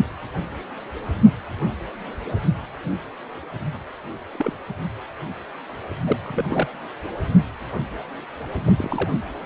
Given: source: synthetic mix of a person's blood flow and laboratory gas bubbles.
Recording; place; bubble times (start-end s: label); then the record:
Doppler ultrasound of blood flow; precordium
4.33-4.54 s: bubbles
6.05-6.17 s: bubbles
6.23-6.67 s: bubbles
8.64-9.10 s: bubbles
9.14-9.20 s: bubbles
From the record:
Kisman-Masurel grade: 221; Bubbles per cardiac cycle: several, 3 to 8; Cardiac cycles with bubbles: 10 to 50%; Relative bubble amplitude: barely perceptible (0.100 to 0.250); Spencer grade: 2 (many but less than half of the cardiac periods contain bubble signals, singularly or in groups); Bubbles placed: anywhere in the cardiac cycle